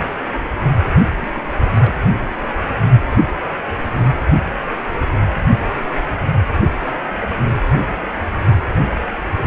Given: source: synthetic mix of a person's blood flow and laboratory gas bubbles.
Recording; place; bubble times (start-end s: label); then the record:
Doppler ultrasound of blood flow; precordium
1.21-1.42 s: bubbles
1.74-1.95 s: bubbles
From the record:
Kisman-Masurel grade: 111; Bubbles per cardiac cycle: 1 to 2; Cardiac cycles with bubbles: 1 to 10%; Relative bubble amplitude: barely perceptible (0.100 to 0.250); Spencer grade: 1 (occasional bubble signal discernible with the cardiac motion signal, with majority of cardiac periods free of bubbles); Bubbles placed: anywhere in the cardiac cycle